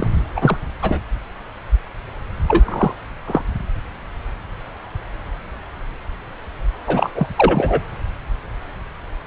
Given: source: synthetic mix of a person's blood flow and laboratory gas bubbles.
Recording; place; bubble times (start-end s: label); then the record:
Doppler ultrasound of blood flow; subclavian vein
0.00-0.08 s: bubbles
0.36-0.57 s: bubbles
0.81-0.99 s: bubbles
2.47-2.93 s: bubbles
3.27-3.43 s: bubbles
6.87-7.11 s: bubbles
7.15-7.27 s: bubbles
7.36-7.82 s: bubbles
From the record:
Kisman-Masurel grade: 223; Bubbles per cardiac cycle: several, 3 to 8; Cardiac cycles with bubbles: 10 to 50%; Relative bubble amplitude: loud (0.450 to 0.775); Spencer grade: 2 (many but less than half of the cardiac periods contain bubble signals, singularly or in groups); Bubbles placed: anywhere in the cardiac cycle